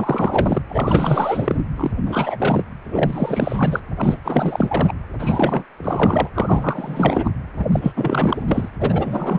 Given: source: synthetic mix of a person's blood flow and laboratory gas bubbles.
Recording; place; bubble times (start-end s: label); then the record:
Doppler ultrasound of blood flow; precordium
0.00-0.62 s: bubbles
0.69-1.61 s: bubbles
1.76-1.92 s: bubbles
2.05-2.63 s: bubbles
2.83-3.79 s: bubbles
3.96-4.20 s: bubbles
4.24-4.93 s: bubbles
5.19-5.64 s: bubbles
5.77-6.28 s: bubbles
6.34-7.31 s: bubbles
7.56-7.67 s: bubbles
7.71-7.92 s: bubbles
7.96-8.69 s: bubbles
8.80-9.39 s: bubbles
From the record:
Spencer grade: 4 (maximum detectable bubble signal sounding continuously throughout systole and diastole of every cardiac period, and overriding the amplitude of the normal cardiac signals); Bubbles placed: anywhere in the cardiac cycle